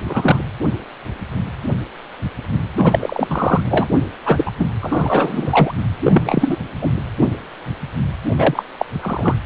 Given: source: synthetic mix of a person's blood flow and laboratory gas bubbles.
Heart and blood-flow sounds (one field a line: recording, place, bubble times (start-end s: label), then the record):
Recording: Doppler ultrasound of blood flow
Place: precordium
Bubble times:
0.04-0.39 s: bubbles
2.77-3.27 s: bubbles
3.29-3.63 s: bubbles
3.70-3.88 s: bubbles
4.25-4.51 s: bubbles
4.58-4.67 s: bubbles
4.81-5.74 s: bubbles
6.02-6.56 s: bubbles
6.81-6.90 s: bubbles
8.38-8.63 s: bubbles
8.79-8.86 s: bubbles
9.02-9.35 s: bubbles
From the record:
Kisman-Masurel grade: 233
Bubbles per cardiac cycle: several, 3 to 8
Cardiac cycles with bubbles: 50 to 99%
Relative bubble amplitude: loud (0.450 to 0.775)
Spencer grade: 3 (all of the cardiac periods contain showers or single bubble signals, but not dominating or overriding the cardiac motion signals)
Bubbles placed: anywhere in the cardiac cycle